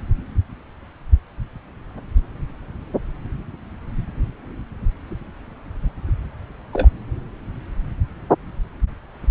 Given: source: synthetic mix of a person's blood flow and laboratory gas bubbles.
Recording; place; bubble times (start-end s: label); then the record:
Doppler ultrasound of blood flow; subclavian vein
6.72-6.88 s: bubbles
From the record:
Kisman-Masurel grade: 122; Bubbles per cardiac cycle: 1 to 2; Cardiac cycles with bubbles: 10 to 50%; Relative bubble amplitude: moderate (0.250 to 0.450); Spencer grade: 2 (many but less than half of the cardiac periods contain bubble signals, singularly or in groups); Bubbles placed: anywhere in the cardiac cycle